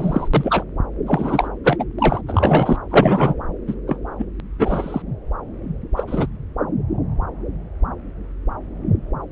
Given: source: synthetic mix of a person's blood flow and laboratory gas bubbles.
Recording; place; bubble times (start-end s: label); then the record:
Doppler ultrasound of blood flow; subclavian vein
0.00-0.28 s: bubbles
0.34-0.65 s: bubbles
1.06-1.48 s: bubbles
1.64-1.85 s: bubbles
1.98-2.21 s: bubbles
2.27-2.77 s: bubbles
2.90-3.35 s: bubbles
3.67-3.75 s: bubbles
3.87-3.99 s: bubbles
4.18-4.25 s: bubbles
4.58-5.02 s: bubbles
5.96-6.04 s: bubbles
6.07-6.26 s: bubbles
From the record:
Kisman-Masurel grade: 233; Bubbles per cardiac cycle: several, 3 to 8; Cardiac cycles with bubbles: 50 to 99%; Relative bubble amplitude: loud (0.450 to 0.775); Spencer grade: 3 (all of the cardiac periods contain showers or single bubble signals, but not dominating or overriding the cardiac motion signals); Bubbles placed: anywhere in the cardiac cycle